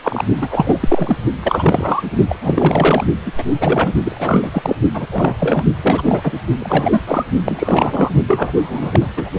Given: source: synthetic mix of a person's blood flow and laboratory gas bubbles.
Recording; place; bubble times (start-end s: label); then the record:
Doppler ultrasound of blood flow; precordium
0.03-0.23 s: bubbles
0.40-1.17 s: bubbles
1.43-2.02 s: bubbles
2.29-2.37 s: bubbles
2.41-3.04 s: bubbles
3.25-3.32 s: bubbles
3.38-3.44 s: bubbles
3.60-3.92 s: bubbles
4.04-4.75 s: bubbles
4.94-5.06 s: bubbles
5.11-5.35 s: bubbles
5.39-5.65 s: bubbles
5.82-6.32 s: bubbles
6.58-7.01 s: bubbles
7.07-7.25 s: bubbles
7.45-8.11 s: bubbles
8.28-9.07 s: bubbles
9.17-9.29 s: bubbles
From the record:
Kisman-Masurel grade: 343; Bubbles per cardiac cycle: rolling drumbeat, 9 or more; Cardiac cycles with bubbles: 100%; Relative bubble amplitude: loud (0.450 to 0.775); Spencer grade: 3 (all of the cardiac periods contain showers or single bubble signals, but not dominating or overriding the cardiac motion signals); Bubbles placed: only in the low amplitude regions of the cardiac cycle